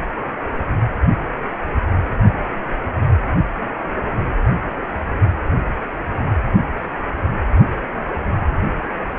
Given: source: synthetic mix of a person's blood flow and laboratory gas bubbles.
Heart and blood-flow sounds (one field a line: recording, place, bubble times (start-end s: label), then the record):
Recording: Doppler ultrasound of blood flow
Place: precordium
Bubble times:
no bubbles
From the record:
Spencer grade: 0 (complete lack of bubble signals)